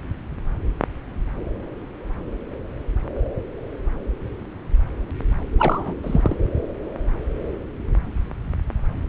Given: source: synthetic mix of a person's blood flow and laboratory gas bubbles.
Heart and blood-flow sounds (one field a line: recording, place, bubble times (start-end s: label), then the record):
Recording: Doppler ultrasound of blood flow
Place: subclavian vein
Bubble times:
5.58-5.94 s: bubbles
6.03-6.37 s: bubbles
From the record:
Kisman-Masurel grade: 212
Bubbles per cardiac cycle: several, 3 to 8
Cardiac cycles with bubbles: 1 to 10%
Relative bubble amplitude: moderate (0.250 to 0.450)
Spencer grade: 1 (occasional bubble signal discernible with the cardiac motion signal, with majority of cardiac periods free of bubbles)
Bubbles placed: anywhere in the cardiac cycle